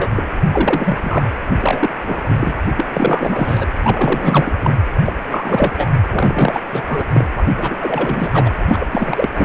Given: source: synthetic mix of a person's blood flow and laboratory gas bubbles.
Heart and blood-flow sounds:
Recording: Doppler ultrasound of blood flow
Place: precordium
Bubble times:
0.00-0.09 s: bubbles
0.16-0.23 s: bubbles
0.52-1.30 s: bubbles
1.61-1.90 s: bubbles
2.03-2.53 s: bubbles
2.76-2.86 s: bubbles
2.93-3.67 s: bubbles
3.83-4.52 s: bubbles
4.62-4.75 s: bubbles
5.05-5.12 s: bubbles
5.29-5.71 s: bubbles
5.78-5.89 s: bubbles
6.10-6.61 s: bubbles
6.65-6.83 s: bubbles
6.88-7.04 s: bubbles
7.12-7.27 s: bubbles
7.37-7.43 s: bubbles
7.57-7.76 s: bubbles
7.80-8.53 s: bubbles
8.67-8.87 s: bubbles
8.91-9.29 s: bubbles
9.37-9.45 s: bubbles
From the record:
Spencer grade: 3 (all of the cardiac periods contain showers or single bubble signals, but not dominating or overriding the cardiac motion signals)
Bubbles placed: anywhere in the cardiac cycle

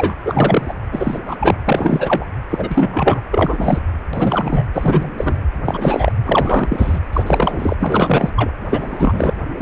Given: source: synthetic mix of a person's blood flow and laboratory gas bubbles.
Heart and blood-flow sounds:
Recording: Doppler ultrasound of blood flow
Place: precordium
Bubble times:
0.00-0.17 s: bubbles
0.23-0.74 s: bubbles
0.92-1.19 s: bubbles
1.25-1.37 s: bubbles
1.40-1.56 s: bubbles
1.66-2.25 s: bubbles
2.50-3.21 s: bubbles
3.31-3.79 s: bubbles
4.13-4.67 s: bubbles
4.74-5.10 s: bubbles
5.17-5.41 s: bubbles
5.65-6.12 s: bubbles
6.25-7.00 s: bubbles
7.12-7.24 s: bubbles
7.26-7.75 s: bubbles
7.78-8.29 s: bubbles
8.36-8.51 s: bubbles
8.68-9.33 s: bubbles
9.58-9.62 s: bubbles
From the record:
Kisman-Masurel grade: 343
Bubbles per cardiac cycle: rolling drumbeat, 9 or more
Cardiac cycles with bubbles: 100%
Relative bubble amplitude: loud (0.450 to 0.775)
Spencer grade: 3 (all of the cardiac periods contain showers or single bubble signals, but not dominating or overriding the cardiac motion signals)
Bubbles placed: anywhere in the cardiac cycle

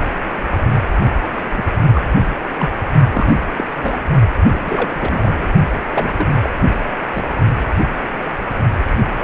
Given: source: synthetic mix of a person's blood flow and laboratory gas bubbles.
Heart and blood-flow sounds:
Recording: Doppler ultrasound of blood flow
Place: precordium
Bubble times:
1.31-1.64 s: bubbles
1.94-2.02 s: bubbles
2.58-2.69 s: bubbles
3.13-3.35 s: bubbles
3.40-3.46 s: bubbles
3.57-3.64 s: bubbles
3.72-3.99 s: bubbles
4.53-4.60 s: bubbles
4.64-5.48 s: bubbles
5.95-6.26 s: bubbles
6.42-6.50 s: bubbles
7.14-7.31 s: bubbles
From the record:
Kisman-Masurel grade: 232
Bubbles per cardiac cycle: several, 3 to 8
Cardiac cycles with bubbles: 50 to 99%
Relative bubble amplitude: moderate (0.250 to 0.450)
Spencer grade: 3 (all of the cardiac periods contain showers or single bubble signals, but not dominating or overriding the cardiac motion signals)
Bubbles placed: only in the low amplitude regions of the cardiac cycle

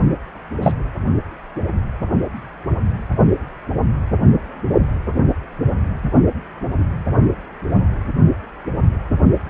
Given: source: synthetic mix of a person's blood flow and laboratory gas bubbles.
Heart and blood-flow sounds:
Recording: Doppler ultrasound of blood flow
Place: precordium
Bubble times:
0.60-0.72 s: bubbles
From the record:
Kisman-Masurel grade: 112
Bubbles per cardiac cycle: 1 to 2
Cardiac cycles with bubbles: 1 to 10%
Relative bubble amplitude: moderate (0.250 to 0.450)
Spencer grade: 1 (occasional bubble signal discernible with the cardiac motion signal, with majority of cardiac periods free of bubbles)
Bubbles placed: only in the low amplitude regions of the cardiac cycle

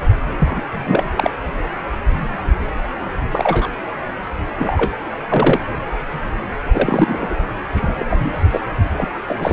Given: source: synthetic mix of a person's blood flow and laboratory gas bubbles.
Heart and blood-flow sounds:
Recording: Doppler ultrasound of blood flow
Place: precordium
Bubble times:
0.40-0.62 s: bubbles
0.72-1.12 s: bubbles
1.15-1.30 s: bubbles
3.31-3.69 s: bubbles
4.59-4.92 s: bubbles
5.29-5.60 s: bubbles
6.72-7.37 s: bubbles
7.75-8.06 s: bubbles
8.10-8.39 s: bubbles
8.51-8.61 s: bubbles
8.96-9.11 s: bubbles
9.27-9.52 s: bubbles
From the record:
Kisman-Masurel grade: 233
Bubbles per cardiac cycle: several, 3 to 8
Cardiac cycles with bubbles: 50 to 99%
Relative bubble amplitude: loud (0.450 to 0.775)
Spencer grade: 3 (all of the cardiac periods contain showers or single bubble signals, but not dominating or overriding the cardiac motion signals)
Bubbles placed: anywhere in the cardiac cycle

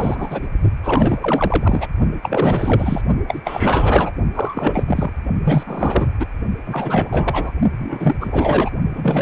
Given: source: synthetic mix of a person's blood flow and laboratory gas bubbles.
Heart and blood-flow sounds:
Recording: Doppler ultrasound of blood flow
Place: precordium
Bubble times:
0.00-0.48 s: bubbles
0.83-1.88 s: bubbles
2.22-3.02 s: bubbles
3.28-3.40 s: bubbles
3.44-4.11 s: bubbles
4.34-4.83 s: bubbles
4.87-5.13 s: bubbles
5.44-6.10 s: bubbles
6.19-6.27 s: bubbles
6.66-7.52 s: bubbles
7.79-8.16 s: bubbles
8.21-8.71 s: bubbles
8.94-9.22 s: bubbles
From the record:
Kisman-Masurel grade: 444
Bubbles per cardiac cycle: continuous sound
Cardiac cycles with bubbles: 100%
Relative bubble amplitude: maximal (0.775 to 0.999)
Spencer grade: 4 (maximum detectable bubble signal sounding continuously throughout systole and diastole of every cardiac period, and overriding the amplitude of the normal cardiac signals)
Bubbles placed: only in the low amplitude regions of the cardiac cycle

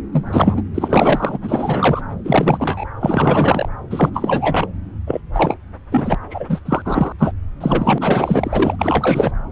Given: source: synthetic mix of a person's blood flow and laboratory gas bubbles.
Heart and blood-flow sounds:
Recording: Doppler ultrasound of blood flow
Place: subclavian vein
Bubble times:
0.12-0.61 s: bubbles
0.74-1.38 s: bubbles
1.43-2.01 s: bubbles
2.24-2.85 s: bubbles
3.01-3.69 s: bubbles
3.90-4.10 s: bubbles
4.14-4.67 s: bubbles
5.07-5.21 s: bubbles
5.33-5.57 s: bubbles
5.91-6.15 s: bubbles
6.30-6.60 s: bubbles
6.65-6.82 s: bubbles
6.85-7.12 s: bubbles
7.19-7.32 s: bubbles
7.60-8.76 s: bubbles
8.79-9.31 s: bubbles
From the record:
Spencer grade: 3 (all of the cardiac periods contain showers or single bubble signals, but not dominating or overriding the cardiac motion signals)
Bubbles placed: anywhere in the cardiac cycle

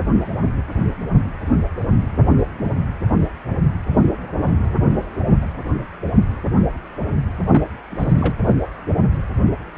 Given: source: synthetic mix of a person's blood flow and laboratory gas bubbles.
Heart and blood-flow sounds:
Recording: Doppler ultrasound of blood flow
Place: precordium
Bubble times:
7.50-7.62 s: bubbles
7.91-8.35 s: bubbles
From the record:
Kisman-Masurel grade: 222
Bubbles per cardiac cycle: several, 3 to 8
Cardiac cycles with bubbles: 10 to 50%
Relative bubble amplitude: moderate (0.250 to 0.450)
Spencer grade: 2 (many but less than half of the cardiac periods contain bubble signals, singularly or in groups)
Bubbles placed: anywhere in the cardiac cycle

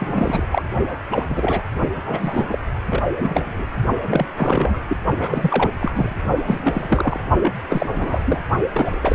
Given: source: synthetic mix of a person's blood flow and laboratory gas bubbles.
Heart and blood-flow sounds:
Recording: Doppler ultrasound of blood flow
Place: precordium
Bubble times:
0.00-0.45 s: bubbles
0.51-0.62 s: bubbles
1.11-1.26 s: bubbles
1.28-1.62 s: bubbles
2.05-2.58 s: bubbles
2.90-3.03 s: bubbles
3.19-3.68 s: bubbles
4.08-4.26 s: bubbles
4.37-4.79 s: bubbles
4.88-4.97 s: bubbles
5.19-5.71 s: bubbles
5.80-6.14 s: bubbles
6.46-7.19 s: bubbles
7.39-7.52 s: bubbles
7.70-7.86 s: bubbles
7.94-8.40 s: bubbles
8.73-9.15 s: bubbles
From the record:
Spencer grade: 3 (all of the cardiac periods contain showers or single bubble signals, but not dominating or overriding the cardiac motion signals)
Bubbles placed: only in the low amplitude regions of the cardiac cycle

